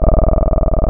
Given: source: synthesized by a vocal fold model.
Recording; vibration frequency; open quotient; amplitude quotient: sustained vowel; 20 Hz; 0.4; 1.1